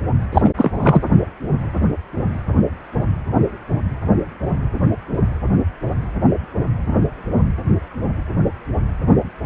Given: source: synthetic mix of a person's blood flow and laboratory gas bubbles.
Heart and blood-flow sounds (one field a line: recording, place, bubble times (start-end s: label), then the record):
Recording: Doppler ultrasound of blood flow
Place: precordium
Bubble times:
0.32-0.50 s: bubbles
0.57-0.71 s: bubbles
0.73-1.01 s: bubbles
From the record:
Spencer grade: 1 (occasional bubble signal discernible with the cardiac motion signal, with majority of cardiac periods free of bubbles)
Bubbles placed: anywhere in the cardiac cycle